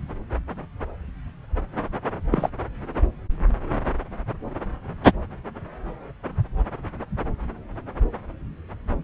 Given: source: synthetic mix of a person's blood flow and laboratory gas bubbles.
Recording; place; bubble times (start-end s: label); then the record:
Doppler ultrasound of blood flow; subclavian vein
2.30-2.49 s: bubbles
From the record:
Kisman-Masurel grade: 112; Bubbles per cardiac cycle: 1 to 2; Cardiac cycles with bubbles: 1 to 10%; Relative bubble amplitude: moderate (0.250 to 0.450); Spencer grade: 1 (occasional bubble signal discernible with the cardiac motion signal, with majority of cardiac periods free of bubbles); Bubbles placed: anywhere in the cardiac cycle